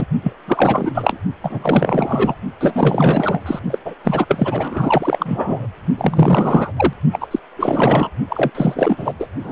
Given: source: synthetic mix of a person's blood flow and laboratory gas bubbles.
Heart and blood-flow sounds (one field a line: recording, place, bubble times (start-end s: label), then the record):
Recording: Doppler ultrasound of blood flow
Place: precordium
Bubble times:
0.00-0.06 s: bubbles
0.23-0.33 s: bubbles
0.47-1.17 s: bubbles
1.42-2.35 s: bubbles
2.60-3.43 s: bubbles
3.46-3.59 s: bubbles
3.70-3.79 s: bubbles
3.84-3.94 s: bubbles
4.04-4.25 s: bubbles
4.28-5.67 s: bubbles
5.97-6.72 s: bubbles
6.76-6.94 s: bubbles
7.12-7.27 s: bubbles
7.31-7.39 s: bubbles
7.57-8.10 s: bubbles
8.29-8.50 s: bubbles
8.54-9.13 s: bubbles
9.19-9.27 s: bubbles
9.43-9.52 s: bubbles
From the record:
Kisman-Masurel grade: 444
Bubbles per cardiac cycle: continuous sound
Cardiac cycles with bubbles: 100%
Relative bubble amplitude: maximal (0.775 to 0.999)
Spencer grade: 4 (maximum detectable bubble signal sounding continuously throughout systole and diastole of every cardiac period, and overriding the amplitude of the normal cardiac signals)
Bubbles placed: only in the low amplitude regions of the cardiac cycle